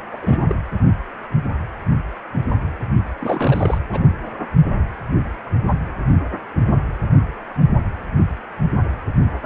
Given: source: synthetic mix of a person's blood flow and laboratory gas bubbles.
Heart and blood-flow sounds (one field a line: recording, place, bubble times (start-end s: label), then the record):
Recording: Doppler ultrasound of blood flow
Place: precordium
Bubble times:
0.11-0.18 s: bubbles
0.22-0.43 s: bubbles
0.46-0.55 s: bubbles
3.19-3.79 s: bubbles
3.92-4.00 s: bubbles
From the record:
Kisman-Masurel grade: 222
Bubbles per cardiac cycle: several, 3 to 8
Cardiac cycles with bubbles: 10 to 50%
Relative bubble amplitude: moderate (0.250 to 0.450)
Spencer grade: 2 (many but less than half of the cardiac periods contain bubble signals, singularly or in groups)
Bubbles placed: only in the low amplitude regions of the cardiac cycle